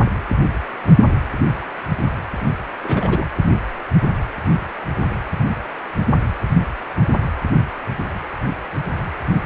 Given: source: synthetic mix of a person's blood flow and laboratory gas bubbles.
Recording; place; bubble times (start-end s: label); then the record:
Doppler ultrasound of blood flow; precordium
2.83-3.25 s: bubbles
From the record:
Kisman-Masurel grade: 113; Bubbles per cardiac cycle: 1 to 2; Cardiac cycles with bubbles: 1 to 10%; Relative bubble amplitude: loud (0.450 to 0.775); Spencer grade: 1 (occasional bubble signal discernible with the cardiac motion signal, with majority of cardiac periods free of bubbles); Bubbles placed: anywhere in the cardiac cycle